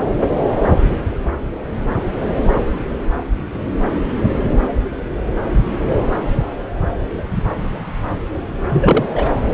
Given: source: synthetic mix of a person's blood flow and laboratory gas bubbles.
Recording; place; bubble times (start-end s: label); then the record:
Doppler ultrasound of blood flow; subclavian vein
8.68-9.05 s: bubbles
9.15-9.31 s: bubbles
From the record:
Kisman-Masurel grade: 223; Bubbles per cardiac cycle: several, 3 to 8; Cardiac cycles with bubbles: 10 to 50%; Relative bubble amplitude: loud (0.450 to 0.775); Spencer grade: 2 (many but less than half of the cardiac periods contain bubble signals, singularly or in groups); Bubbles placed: anywhere in the cardiac cycle